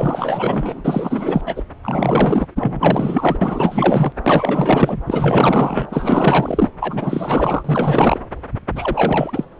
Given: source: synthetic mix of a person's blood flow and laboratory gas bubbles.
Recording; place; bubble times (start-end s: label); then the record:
Doppler ultrasound of blood flow; subclavian vein
0.00-0.81 s: bubbles
0.84-1.63 s: bubbles
1.83-2.46 s: bubbles
2.55-3.38 s: bubbles
3.41-4.12 s: bubbles
4.23-5.01 s: bubbles
5.06-5.87 s: bubbles
5.89-6.69 s: bubbles
6.79-8.20 s: bubbles
8.75-9.45 s: bubbles
From the record:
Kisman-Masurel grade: 444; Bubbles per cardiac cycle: continuous sound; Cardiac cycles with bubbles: 100%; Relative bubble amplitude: maximal (0.775 to 0.999); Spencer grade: 4 (maximum detectable bubble signal sounding continuously throughout systole and diastole of every cardiac period, and overriding the amplitude of the normal cardiac signals); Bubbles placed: anywhere in the cardiac cycle